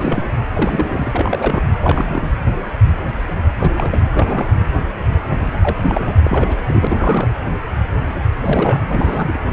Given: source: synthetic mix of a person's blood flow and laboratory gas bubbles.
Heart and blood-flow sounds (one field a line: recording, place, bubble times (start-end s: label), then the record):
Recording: Doppler ultrasound of blood flow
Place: precordium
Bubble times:
0.00-0.23 s: bubbles
0.53-1.62 s: bubbles
1.80-2.29 s: bubbles
3.59-3.70 s: bubbles
3.77-4.09 s: bubbles
4.12-4.50 s: bubbles
5.40-5.50 s: bubbles
5.53-6.17 s: bubbles
6.23-6.58 s: bubbles
6.65-7.35 s: bubbles
8.40-8.80 s: bubbles
8.88-9.39 s: bubbles
From the record:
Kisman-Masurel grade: 332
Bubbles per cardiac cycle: rolling drumbeat, 9 or more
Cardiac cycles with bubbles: 50 to 99%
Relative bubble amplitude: moderate (0.250 to 0.450)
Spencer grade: 3 (all of the cardiac periods contain showers or single bubble signals, but not dominating or overriding the cardiac motion signals)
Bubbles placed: anywhere in the cardiac cycle